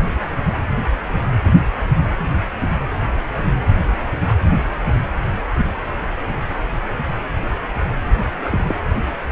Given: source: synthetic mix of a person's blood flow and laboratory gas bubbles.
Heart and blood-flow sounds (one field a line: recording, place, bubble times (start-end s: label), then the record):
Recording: Doppler ultrasound of blood flow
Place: precordium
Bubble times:
8.44-8.76 s: bubbles
From the record:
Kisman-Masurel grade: 112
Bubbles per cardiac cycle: 1 to 2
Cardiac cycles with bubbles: 1 to 10%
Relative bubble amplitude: moderate (0.250 to 0.450)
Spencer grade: 1 (occasional bubble signal discernible with the cardiac motion signal, with majority of cardiac periods free of bubbles)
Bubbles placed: anywhere in the cardiac cycle